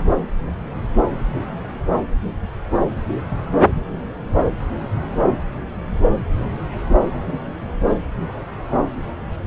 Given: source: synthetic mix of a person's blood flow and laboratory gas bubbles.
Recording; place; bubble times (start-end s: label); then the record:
Doppler ultrasound of blood flow; subclavian vein
no bubbles
From the record:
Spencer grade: 0 (complete lack of bubble signals)